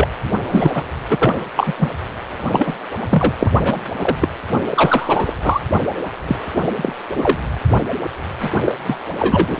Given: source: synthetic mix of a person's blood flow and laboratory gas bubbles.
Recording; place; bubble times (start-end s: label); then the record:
Doppler ultrasound of blood flow; precordium
0.00-0.08 s: bubbles
0.50-0.83 s: bubbles
1.10-1.34 s: bubbles
1.56-1.73 s: bubbles
1.78-1.89 s: bubbles
2.48-2.75 s: bubbles
3.10-3.33 s: bubbles
3.41-3.52 s: bubbles
3.63-3.85 s: bubbles
4.00-4.17 s: bubbles
4.21-4.28 s: bubbles
4.52-4.60 s: bubbles
4.70-5.33 s: bubbles
5.42-5.61 s: bubbles
6.27-6.36 s: bubbles
6.76-6.93 s: bubbles
7.16-7.38 s: bubbles
8.39-8.50 s: bubbles
8.64-8.73 s: bubbles
8.86-8.97 s: bubbles
9.19-9.60 s: bubbles
From the record:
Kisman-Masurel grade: 243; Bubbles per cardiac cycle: several, 3 to 8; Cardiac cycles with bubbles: 100%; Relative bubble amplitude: loud (0.450 to 0.775); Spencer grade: 3 (all of the cardiac periods contain showers or single bubble signals, but not dominating or overriding the cardiac motion signals); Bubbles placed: anywhere in the cardiac cycle